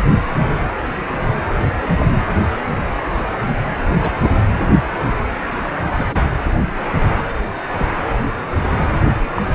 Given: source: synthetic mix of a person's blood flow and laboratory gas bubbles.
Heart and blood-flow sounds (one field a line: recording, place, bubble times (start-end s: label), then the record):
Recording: Doppler ultrasound of blood flow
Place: precordium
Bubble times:
1.73-1.90 s: bubbles
1.98-2.08 s: bubbles
3.44-3.54 s: bubbles
4.01-4.11 s: bubbles
4.22-4.30 s: bubbles
5.96-6.19 s: bubbles
7.79-7.86 s: bubbles
9.10-9.14 s: bubbles
9.31-9.42 s: bubbles
From the record:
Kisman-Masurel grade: 122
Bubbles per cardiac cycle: 1 to 2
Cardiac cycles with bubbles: 10 to 50%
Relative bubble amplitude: moderate (0.250 to 0.450)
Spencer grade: 2 (many but less than half of the cardiac periods contain bubble signals, singularly or in groups)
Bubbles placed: anywhere in the cardiac cycle